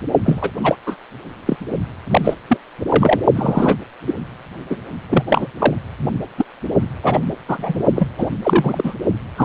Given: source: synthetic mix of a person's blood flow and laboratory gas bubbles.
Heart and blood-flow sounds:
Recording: Doppler ultrasound of blood flow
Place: precordium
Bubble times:
0.25-0.51 s: bubbles
0.63-0.76 s: bubbles
0.86-0.97 s: bubbles
1.46-1.56 s: bubbles
2.11-2.34 s: bubbles
2.49-2.57 s: bubbles
2.88-3.20 s: bubbles
3.35-3.75 s: bubbles
4.07-4.13 s: bubbles
4.70-4.77 s: bubbles
5.09-5.24 s: bubbles
5.28-5.47 s: bubbles
5.58-5.75 s: bubbles
6.38-6.45 s: bubbles
7.03-7.21 s: bubbles
7.48-7.83 s: bubbles
7.95-8.08 s: bubbles
8.18-8.30 s: bubbles
8.43-8.94 s: bubbles
9.36-9.45 s: bubbles
From the record:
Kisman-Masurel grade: 243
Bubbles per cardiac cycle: several, 3 to 8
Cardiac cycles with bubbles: 100%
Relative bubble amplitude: loud (0.450 to 0.775)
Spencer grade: 3 (all of the cardiac periods contain showers or single bubble signals, but not dominating or overriding the cardiac motion signals)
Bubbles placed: only in the low amplitude regions of the cardiac cycle

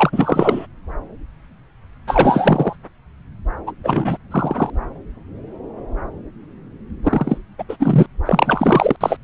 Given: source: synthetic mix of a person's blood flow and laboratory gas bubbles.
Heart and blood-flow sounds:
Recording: Doppler ultrasound of blood flow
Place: subclavian vein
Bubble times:
0.00-0.67 s: bubbles
2.07-2.75 s: bubbles
3.66-3.72 s: bubbles
3.83-4.18 s: bubbles
4.30-4.70 s: bubbles
7.03-7.39 s: bubbles
7.58-7.63 s: bubbles
7.68-7.76 s: bubbles
7.79-8.06 s: bubbles
8.25-8.96 s: bubbles
9.00-9.16 s: bubbles
From the record:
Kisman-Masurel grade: 333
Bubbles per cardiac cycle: rolling drumbeat, 9 or more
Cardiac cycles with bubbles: 50 to 99%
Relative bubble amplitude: loud (0.450 to 0.775)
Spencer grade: 3 (all of the cardiac periods contain showers or single bubble signals, but not dominating or overriding the cardiac motion signals)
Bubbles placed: anywhere in the cardiac cycle

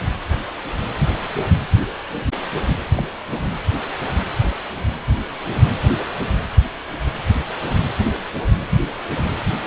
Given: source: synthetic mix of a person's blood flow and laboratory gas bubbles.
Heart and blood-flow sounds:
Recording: Doppler ultrasound of blood flow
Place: precordium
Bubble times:
2.96-3.02 s: bubbles
3.30-3.41 s: bubbles
From the record:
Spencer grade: 1 (occasional bubble signal discernible with the cardiac motion signal, with majority of cardiac periods free of bubbles)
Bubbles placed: anywhere in the cardiac cycle

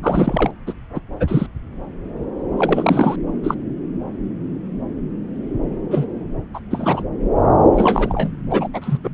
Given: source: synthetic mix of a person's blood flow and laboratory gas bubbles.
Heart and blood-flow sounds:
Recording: Doppler ultrasound of blood flow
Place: subclavian vein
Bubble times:
0.03-0.51 s: bubbles
0.66-0.73 s: bubbles
0.94-1.00 s: bubbles
1.19-1.46 s: bubbles
2.57-3.16 s: bubbles
3.43-3.55 s: bubbles
5.91-6.05 s: bubbles
6.54-6.60 s: bubbles
6.70-7.03 s: bubbles
7.76-8.34 s: bubbles
8.50-8.68 s: bubbles
8.73-8.97 s: bubbles
9.04-9.10 s: bubbles
From the record:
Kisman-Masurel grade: 223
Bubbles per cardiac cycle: several, 3 to 8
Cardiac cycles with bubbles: 10 to 50%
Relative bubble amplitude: loud (0.450 to 0.775)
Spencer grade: 2 (many but less than half of the cardiac periods contain bubble signals, singularly or in groups)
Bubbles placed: anywhere in the cardiac cycle

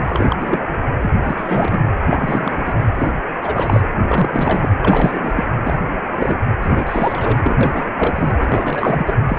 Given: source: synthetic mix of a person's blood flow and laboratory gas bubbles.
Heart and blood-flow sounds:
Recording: Doppler ultrasound of blood flow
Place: precordium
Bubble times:
0.03-0.36 s: bubbles
0.39-0.65 s: bubbles
1.01-1.11 s: bubbles
1.24-1.79 s: bubbles
2.08-2.73 s: bubbles
2.95-3.09 s: bubbles
3.38-3.81 s: bubbles
4.07-4.71 s: bubbles
4.82-5.33 s: bubbles
5.36-5.45 s: bubbles
5.65-5.78 s: bubbles
6.13-6.37 s: bubbles
6.60-7.57 s: bubbles
7.61-7.91 s: bubbles
7.96-8.32 s: bubbles
8.38-9.15 s: bubbles
9.27-9.38 s: bubbles
From the record:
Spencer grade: 3 (all of the cardiac periods contain showers or single bubble signals, but not dominating or overriding the cardiac motion signals)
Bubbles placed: anywhere in the cardiac cycle

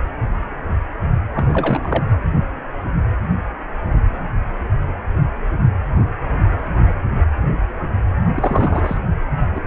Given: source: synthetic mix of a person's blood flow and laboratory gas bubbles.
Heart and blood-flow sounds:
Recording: Doppler ultrasound of blood flow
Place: precordium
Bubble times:
1.35-2.06 s: bubbles
8.34-8.97 s: bubbles
9.55-9.61 s: bubbles
From the record:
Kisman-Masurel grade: 222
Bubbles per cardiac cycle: several, 3 to 8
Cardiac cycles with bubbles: 10 to 50%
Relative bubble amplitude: moderate (0.250 to 0.450)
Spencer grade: 2 (many but less than half of the cardiac periods contain bubble signals, singularly or in groups)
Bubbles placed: anywhere in the cardiac cycle

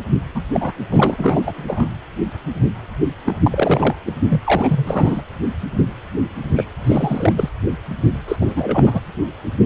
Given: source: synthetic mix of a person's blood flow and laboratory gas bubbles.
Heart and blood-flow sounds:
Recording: Doppler ultrasound of blood flow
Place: precordium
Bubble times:
0.35-0.43 s: bubbles
0.51-0.72 s: bubbles
0.90-1.43 s: bubbles
1.46-1.87 s: bubbles
3.25-3.38 s: bubbles
3.42-3.95 s: bubbles
4.06-4.12 s: bubbles
4.29-4.41 s: bubbles
4.44-5.21 s: bubbles
6.56-6.65 s: bubbles
6.79-7.33 s: bubbles
7.37-7.49 s: bubbles
8.28-8.36 s: bubbles
8.41-9.00 s: bubbles
From the record:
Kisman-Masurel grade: 332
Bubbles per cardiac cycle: rolling drumbeat, 9 or more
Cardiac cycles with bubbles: 50 to 99%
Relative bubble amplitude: moderate (0.250 to 0.450)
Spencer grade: 3 (all of the cardiac periods contain showers or single bubble signals, but not dominating or overriding the cardiac motion signals)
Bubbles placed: anywhere in the cardiac cycle

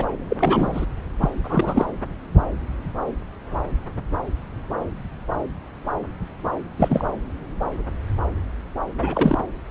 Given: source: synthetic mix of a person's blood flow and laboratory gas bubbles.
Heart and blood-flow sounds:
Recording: Doppler ultrasound of blood flow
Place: subclavian vein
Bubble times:
0.00-0.04 s: bubbles
0.28-0.86 s: bubbles
1.19-1.90 s: bubbles
6.77-7.05 s: bubbles
8.99-9.38 s: bubbles
From the record:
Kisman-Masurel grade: 223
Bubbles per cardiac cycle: several, 3 to 8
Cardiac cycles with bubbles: 10 to 50%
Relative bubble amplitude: loud (0.450 to 0.775)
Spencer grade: 2 (many but less than half of the cardiac periods contain bubble signals, singularly or in groups)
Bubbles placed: anywhere in the cardiac cycle

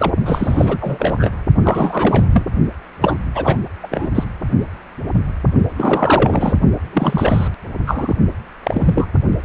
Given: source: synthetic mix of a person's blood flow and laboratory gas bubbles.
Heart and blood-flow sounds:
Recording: Doppler ultrasound of blood flow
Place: precordium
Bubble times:
0.00-0.12 s: bubbles
0.25-0.79 s: bubbles
0.81-1.30 s: bubbles
1.63-2.28 s: bubbles
2.32-2.43 s: bubbles
3.01-3.17 s: bubbles
3.35-3.57 s: bubbles
3.83-3.88 s: bubbles
3.91-4.09 s: bubbles
4.15-4.24 s: bubbles
5.76-6.58 s: bubbles
6.93-7.48 s: bubbles
7.86-8.16 s: bubbles
8.63-9.08 s: bubbles
From the record:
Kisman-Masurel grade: 333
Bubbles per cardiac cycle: rolling drumbeat, 9 or more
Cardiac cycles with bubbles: 50 to 99%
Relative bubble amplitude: loud (0.450 to 0.775)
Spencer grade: 3 (all of the cardiac periods contain showers or single bubble signals, but not dominating or overriding the cardiac motion signals)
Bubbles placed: only in the low amplitude regions of the cardiac cycle

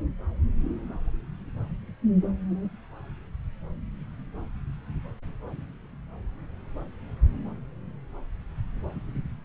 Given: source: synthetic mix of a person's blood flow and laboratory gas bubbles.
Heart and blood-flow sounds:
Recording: Doppler ultrasound of blood flow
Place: subclavian vein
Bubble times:
no bubbles
From the record:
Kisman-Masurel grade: 000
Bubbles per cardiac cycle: 0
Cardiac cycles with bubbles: 0%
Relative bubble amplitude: no bubbles discernible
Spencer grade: 0 (complete lack of bubble signals)

